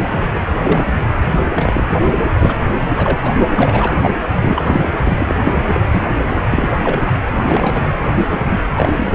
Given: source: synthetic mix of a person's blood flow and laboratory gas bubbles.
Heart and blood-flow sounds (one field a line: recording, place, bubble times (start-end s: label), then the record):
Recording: Doppler ultrasound of blood flow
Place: precordium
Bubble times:
0.10-0.40 s: bubbles
0.61-0.89 s: bubbles
1.21-1.82 s: bubbles
1.90-1.98 s: bubbles
2.11-2.19 s: bubbles
2.39-2.56 s: bubbles
2.59-2.64 s: bubbles
2.96-3.20 s: bubbles
3.23-3.46 s: bubbles
3.57-4.13 s: bubbles
4.34-4.85 s: bubbles
5.03-5.35 s: bubbles
5.44-5.62 s: bubbles
5.67-5.80 s: bubbles
5.90-6.07 s: bubbles
6.18-6.23 s: bubbles
6.51-6.68 s: bubbles
6.78-7.02 s: bubbles
7.05-7.12 s: bubbles
7.25-7.29 s: bubbles
7.44-7.90 s: bubbles
8.12-8.26 s: bubbles
8.31-8.39 s: bubbles
8.48-8.60 s: bubbles
8.75-9.15 s: bubbles
From the record:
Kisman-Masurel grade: 242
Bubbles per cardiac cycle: several, 3 to 8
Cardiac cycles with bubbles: 100%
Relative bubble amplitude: moderate (0.250 to 0.450)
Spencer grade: 3 (all of the cardiac periods contain showers or single bubble signals, but not dominating or overriding the cardiac motion signals)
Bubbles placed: anywhere in the cardiac cycle